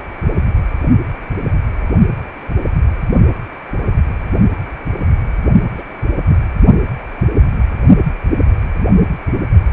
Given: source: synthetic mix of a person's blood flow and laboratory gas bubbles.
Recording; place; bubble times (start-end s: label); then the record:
Doppler ultrasound of blood flow; precordium
5.78-5.82 s: bubbles
6.29-6.37 s: bubbles
From the record:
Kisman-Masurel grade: 111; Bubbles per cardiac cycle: 1 to 2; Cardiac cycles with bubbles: 1 to 10%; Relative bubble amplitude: barely perceptible (0.100 to 0.250); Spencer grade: 1 (occasional bubble signal discernible with the cardiac motion signal, with majority of cardiac periods free of bubbles); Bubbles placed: only in the low amplitude regions of the cardiac cycle